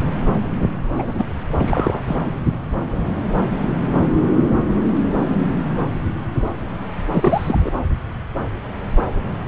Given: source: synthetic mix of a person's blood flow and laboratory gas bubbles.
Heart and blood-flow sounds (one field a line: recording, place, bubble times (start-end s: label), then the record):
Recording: Doppler ultrasound of blood flow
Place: subclavian vein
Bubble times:
0.94-1.33 s: bubbles
1.58-2.00 s: bubbles
2.08-2.17 s: bubbles
2.25-2.32 s: bubbles
7.13-7.72 s: bubbles
From the record:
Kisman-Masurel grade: 222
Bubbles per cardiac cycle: several, 3 to 8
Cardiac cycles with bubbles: 10 to 50%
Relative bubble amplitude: moderate (0.250 to 0.450)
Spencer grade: 2 (many but less than half of the cardiac periods contain bubble signals, singularly or in groups)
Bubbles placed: anywhere in the cardiac cycle